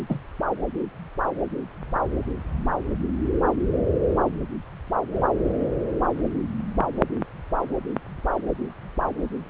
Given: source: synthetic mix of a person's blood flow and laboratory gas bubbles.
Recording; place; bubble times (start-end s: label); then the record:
Doppler ultrasound of blood flow; subclavian vein
0.09-0.17 s: bubbles
From the record:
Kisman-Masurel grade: 112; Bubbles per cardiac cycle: 1 to 2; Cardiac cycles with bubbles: 1 to 10%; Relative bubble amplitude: moderate (0.250 to 0.450); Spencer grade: 1 (occasional bubble signal discernible with the cardiac motion signal, with majority of cardiac periods free of bubbles); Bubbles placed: anywhere in the cardiac cycle